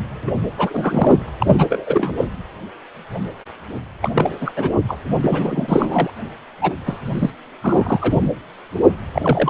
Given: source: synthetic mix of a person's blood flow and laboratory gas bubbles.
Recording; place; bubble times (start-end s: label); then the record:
Doppler ultrasound of blood flow; precordium
0.27-0.32 s: bubbles
0.57-1.17 s: bubbles
1.26-1.30 s: bubbles
1.40-2.25 s: bubbles
4.01-4.10 s: bubbles
4.15-4.52 s: bubbles
4.56-4.73 s: bubbles
4.88-4.98 s: bubbles
5.21-6.10 s: bubbles
6.61-6.73 s: bubbles
6.85-6.97 s: bubbles
7.05-7.30 s: bubbles
7.62-8.28 s: bubbles
9.12-9.50 s: bubbles
From the record:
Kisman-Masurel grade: 332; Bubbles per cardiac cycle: rolling drumbeat, 9 or more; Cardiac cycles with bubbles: 50 to 99%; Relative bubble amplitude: moderate (0.250 to 0.450); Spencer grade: 3 (all of the cardiac periods contain showers or single bubble signals, but not dominating or overriding the cardiac motion signals); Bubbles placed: anywhere in the cardiac cycle